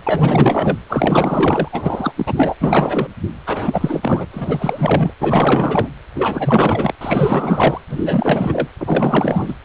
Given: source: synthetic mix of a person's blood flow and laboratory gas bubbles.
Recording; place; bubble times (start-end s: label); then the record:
Doppler ultrasound of blood flow; precordium
0.06-0.77 s: bubbles
0.89-1.69 s: bubbles
1.72-2.13 s: bubbles
2.16-2.55 s: bubbles
2.60-3.08 s: bubbles
3.46-4.27 s: bubbles
4.33-5.13 s: bubbles
5.20-5.89 s: bubbles
6.15-6.94 s: bubbles
7.01-7.81 s: bubbles
7.89-8.68 s: bubbles
8.79-9.54 s: bubbles
From the record:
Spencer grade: 4 (maximum detectable bubble signal sounding continuously throughout systole and diastole of every cardiac period, and overriding the amplitude of the normal cardiac signals); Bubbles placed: anywhere in the cardiac cycle